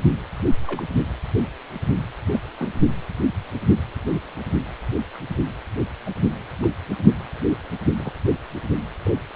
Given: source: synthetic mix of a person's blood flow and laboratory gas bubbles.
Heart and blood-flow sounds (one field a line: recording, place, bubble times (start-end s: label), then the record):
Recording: Doppler ultrasound of blood flow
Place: precordium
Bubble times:
0.66-0.83 s: bubbles
2.32-2.41 s: bubbles
2.58-2.69 s: bubbles
5.14-5.18 s: bubbles
6.06-6.11 s: bubbles
6.62-6.66 s: bubbles
7.97-8.12 s: bubbles
9.04-9.11 s: bubbles
From the record:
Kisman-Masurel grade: 121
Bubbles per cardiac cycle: 1 to 2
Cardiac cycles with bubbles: 10 to 50%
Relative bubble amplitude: barely perceptible (0.100 to 0.250)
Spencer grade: 2 (many but less than half of the cardiac periods contain bubble signals, singularly or in groups)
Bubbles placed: only in the low amplitude regions of the cardiac cycle